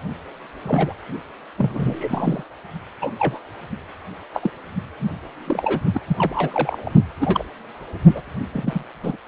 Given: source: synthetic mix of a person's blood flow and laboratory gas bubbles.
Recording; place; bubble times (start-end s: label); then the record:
Doppler ultrasound of blood flow; precordium
0.62-0.93 s: bubbles
1.57-2.43 s: bubbles
3.01-3.11 s: bubbles
3.18-3.39 s: bubbles
4.33-4.50 s: bubbles
5.00-5.11 s: bubbles
5.46-5.81 s: bubbles
5.94-6.00 s: bubbles
6.07-6.92 s: bubbles
7.20-7.45 s: bubbles
8.06-8.22 s: bubbles
8.53-8.84 s: bubbles
9.03-9.17 s: bubbles
From the record:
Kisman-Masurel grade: 242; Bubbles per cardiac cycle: several, 3 to 8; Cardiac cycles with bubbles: 100%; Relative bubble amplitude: moderate (0.250 to 0.450); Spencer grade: 3 (all of the cardiac periods contain showers or single bubble signals, but not dominating or overriding the cardiac motion signals); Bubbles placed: only in the low amplitude regions of the cardiac cycle